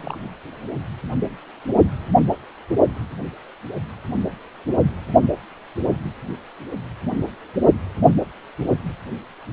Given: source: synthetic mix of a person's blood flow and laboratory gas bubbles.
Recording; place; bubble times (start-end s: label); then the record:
Doppler ultrasound of blood flow; precordium
0.00-0.30 s: bubbles
From the record:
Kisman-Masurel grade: 221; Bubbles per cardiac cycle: several, 3 to 8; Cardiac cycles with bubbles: 10 to 50%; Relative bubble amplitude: barely perceptible (0.100 to 0.250); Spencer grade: 2 (many but less than half of the cardiac periods contain bubble signals, singularly or in groups); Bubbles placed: only in the low amplitude regions of the cardiac cycle